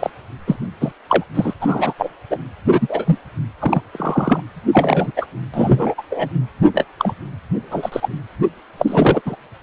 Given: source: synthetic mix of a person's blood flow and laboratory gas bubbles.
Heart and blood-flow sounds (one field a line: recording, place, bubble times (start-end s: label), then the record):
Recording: Doppler ultrasound of blood flow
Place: precordium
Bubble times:
0.00-0.10 s: bubbles
0.47-0.56 s: bubbles
0.81-0.92 s: bubbles
1.09-1.24 s: bubbles
1.34-1.53 s: bubbles
1.60-1.93 s: bubbles
1.97-2.10 s: bubbles
2.31-2.39 s: bubbles
2.66-3.18 s: bubbles
3.61-3.81 s: bubbles
3.93-4.42 s: bubbles
4.72-5.11 s: bubbles
5.15-5.25 s: bubbles
5.53-5.94 s: bubbles
5.97-6.02 s: bubbles
6.10-6.29 s: bubbles
6.73-6.84 s: bubbles
6.98-7.13 s: bubbles
7.71-8.09 s: bubbles
8.78-9.21 s: bubbles
9.25-9.36 s: bubbles
From the record:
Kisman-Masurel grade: 243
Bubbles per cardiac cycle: several, 3 to 8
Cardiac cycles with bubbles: 100%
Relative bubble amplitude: loud (0.450 to 0.775)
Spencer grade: 3 (all of the cardiac periods contain showers or single bubble signals, but not dominating or overriding the cardiac motion signals)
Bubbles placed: anywhere in the cardiac cycle